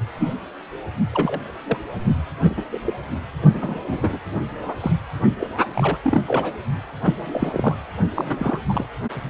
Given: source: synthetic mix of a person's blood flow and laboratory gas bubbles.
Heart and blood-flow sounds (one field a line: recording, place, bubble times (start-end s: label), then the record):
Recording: Doppler ultrasound of blood flow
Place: precordium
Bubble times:
0.18-0.34 s: bubbles
1.12-1.52 s: bubbles
1.66-1.77 s: bubbles
2.44-2.54 s: bubbles
2.57-2.63 s: bubbles
2.71-2.78 s: bubbles
2.86-2.92 s: bubbles
3.53-3.82 s: bubbles
3.87-4.18 s: bubbles
4.66-4.74 s: bubbles
4.80-4.92 s: bubbles
5.39-5.47 s: bubbles
5.74-5.98 s: bubbles
6.04-6.21 s: bubbles
6.28-6.54 s: bubbles
7.02-7.15 s: bubbles
7.17-7.75 s: bubbles
8.14-8.58 s: bubbles
8.68-8.86 s: bubbles
From the record:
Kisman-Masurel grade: 242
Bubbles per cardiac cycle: several, 3 to 8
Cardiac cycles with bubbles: 100%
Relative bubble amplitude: moderate (0.250 to 0.450)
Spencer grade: 3 (all of the cardiac periods contain showers or single bubble signals, but not dominating or overriding the cardiac motion signals)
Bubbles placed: only in the low amplitude regions of the cardiac cycle